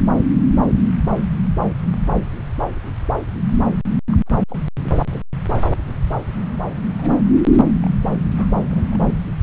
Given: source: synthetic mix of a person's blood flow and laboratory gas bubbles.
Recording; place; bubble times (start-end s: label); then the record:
Doppler ultrasound of blood flow; subclavian vein
4.10-4.17 s: bubbles
4.26-4.35 s: bubbles
4.49-4.57 s: bubbles
4.84-4.92 s: bubbles
5.05-5.21 s: bubbles
6.98-7.12 s: bubbles
7.34-7.41 s: bubbles
7.51-7.65 s: bubbles
7.83-7.87 s: bubbles
8.35-8.46 s: bubbles
8.54-8.79 s: bubbles
8.91-9.02 s: bubbles
From the record:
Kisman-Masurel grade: 221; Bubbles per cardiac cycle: several, 3 to 8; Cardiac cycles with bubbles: 10 to 50%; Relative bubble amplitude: barely perceptible (0.100 to 0.250); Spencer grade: 2 (many but less than half of the cardiac periods contain bubble signals, singularly or in groups); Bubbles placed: anywhere in the cardiac cycle